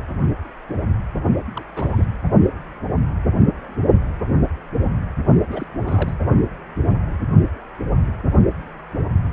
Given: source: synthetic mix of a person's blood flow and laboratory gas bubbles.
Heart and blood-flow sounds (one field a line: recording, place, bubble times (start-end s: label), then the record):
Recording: Doppler ultrasound of blood flow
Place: precordium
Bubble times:
1.53-1.65 s: bubbles
1.76-2.06 s: bubbles
5.50-5.66 s: bubbles
5.79-6.16 s: bubbles
From the record:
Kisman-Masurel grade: 221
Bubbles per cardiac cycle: several, 3 to 8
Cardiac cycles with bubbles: 10 to 50%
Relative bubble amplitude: barely perceptible (0.100 to 0.250)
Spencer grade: 2 (many but less than half of the cardiac periods contain bubble signals, singularly or in groups)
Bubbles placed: only in the low amplitude regions of the cardiac cycle